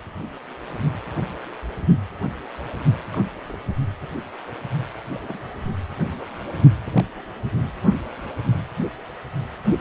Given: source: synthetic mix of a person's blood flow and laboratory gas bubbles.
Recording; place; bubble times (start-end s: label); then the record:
Doppler ultrasound of blood flow; precordium
3.12-3.23 s: bubbles
3.48-3.57 s: bubbles
4.00-4.09 s: bubbles
5.12-5.39 s: bubbles
6.81-7.03 s: bubbles
7.60-7.66 s: bubbles
From the record:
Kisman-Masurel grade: 121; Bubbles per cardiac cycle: 1 to 2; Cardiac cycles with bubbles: 10 to 50%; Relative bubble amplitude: barely perceptible (0.100 to 0.250); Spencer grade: 2 (many but less than half of the cardiac periods contain bubble signals, singularly or in groups); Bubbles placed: only in the low amplitude regions of the cardiac cycle